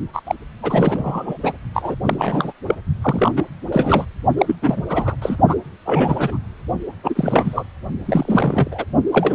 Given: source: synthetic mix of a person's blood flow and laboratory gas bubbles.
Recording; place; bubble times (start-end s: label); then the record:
Doppler ultrasound of blood flow; precordium
0.13-0.21 s: bubbles
0.27-0.35 s: bubbles
0.62-1.37 s: bubbles
1.43-1.53 s: bubbles
1.74-1.95 s: bubbles
2.05-2.53 s: bubbles
2.67-2.75 s: bubbles
3.02-3.32 s: bubbles
3.36-3.45 s: bubbles
3.72-4.05 s: bubbles
4.38-4.55 s: bubbles
4.62-4.83 s: bubbles
4.89-5.15 s: bubbles
5.21-5.37 s: bubbles
5.47-5.55 s: bubbles
5.85-6.40 s: bubbles
7.04-7.64 s: bubbles
8.05-8.69 s: bubbles
8.71-8.85 s: bubbles
9.12-9.35 s: bubbles
From the record:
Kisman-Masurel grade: 342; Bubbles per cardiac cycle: rolling drumbeat, 9 or more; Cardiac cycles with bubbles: 100%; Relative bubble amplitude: moderate (0.250 to 0.450); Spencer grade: 3 (all of the cardiac periods contain showers or single bubble signals, but not dominating or overriding the cardiac motion signals); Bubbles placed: only in the low amplitude regions of the cardiac cycle